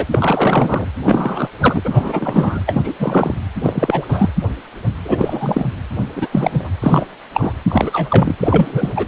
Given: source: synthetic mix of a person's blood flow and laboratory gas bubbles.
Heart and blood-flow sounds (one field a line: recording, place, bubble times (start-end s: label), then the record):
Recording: Doppler ultrasound of blood flow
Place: precordium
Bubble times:
0.00-0.06 s: bubbles
0.14-0.86 s: bubbles
1.03-1.50 s: bubbles
1.59-1.80 s: bubbles
1.83-2.60 s: bubbles
2.66-2.92 s: bubbles
2.99-3.35 s: bubbles
3.63-4.29 s: bubbles
5.04-5.65 s: bubbles
6.16-6.28 s: bubbles
6.32-6.70 s: bubbles
6.80-7.07 s: bubbles
7.33-7.54 s: bubbles
7.69-8.37 s: bubbles
8.39-9.07 s: bubbles
From the record:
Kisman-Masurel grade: 343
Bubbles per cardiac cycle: rolling drumbeat, 9 or more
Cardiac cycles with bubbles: 100%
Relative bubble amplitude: loud (0.450 to 0.775)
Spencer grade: 3 (all of the cardiac periods contain showers or single bubble signals, but not dominating or overriding the cardiac motion signals)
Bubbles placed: anywhere in the cardiac cycle